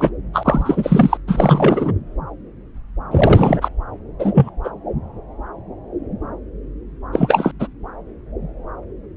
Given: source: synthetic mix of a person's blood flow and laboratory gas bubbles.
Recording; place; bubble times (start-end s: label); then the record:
Doppler ultrasound of blood flow; subclavian vein
0.00-0.10 s: bubbles
0.33-1.17 s: bubbles
1.27-1.92 s: bubbles
3.10-3.69 s: bubbles
4.19-4.49 s: bubbles
4.64-4.70 s: bubbles
7.12-7.51 s: bubbles
7.59-7.67 s: bubbles
From the record:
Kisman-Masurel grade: 223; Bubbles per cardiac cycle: several, 3 to 8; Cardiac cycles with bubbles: 10 to 50%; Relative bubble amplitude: loud (0.450 to 0.775); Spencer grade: 2 (many but less than half of the cardiac periods contain bubble signals, singularly or in groups); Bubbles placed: anywhere in the cardiac cycle